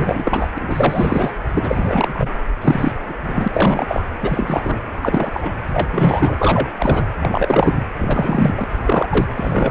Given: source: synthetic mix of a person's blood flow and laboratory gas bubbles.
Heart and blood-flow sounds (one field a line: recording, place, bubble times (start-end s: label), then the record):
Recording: Doppler ultrasound of blood flow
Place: precordium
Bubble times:
0.00-0.48 s: bubbles
0.55-1.30 s: bubbles
1.54-2.30 s: bubbles
2.61-2.92 s: bubbles
3.06-3.14 s: bubbles
3.26-3.48 s: bubbles
3.52-4.02 s: bubbles
4.21-4.83 s: bubbles
5.02-5.58 s: bubbles
5.73-6.69 s: bubbles
6.79-7.03 s: bubbles
7.19-7.85 s: bubbles
7.98-8.64 s: bubbles
8.69-9.26 s: bubbles
9.36-9.70 s: bubbles
From the record:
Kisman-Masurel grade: 343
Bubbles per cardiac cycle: rolling drumbeat, 9 or more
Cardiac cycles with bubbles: 100%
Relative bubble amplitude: loud (0.450 to 0.775)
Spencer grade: 3 (all of the cardiac periods contain showers or single bubble signals, but not dominating or overriding the cardiac motion signals)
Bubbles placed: anywhere in the cardiac cycle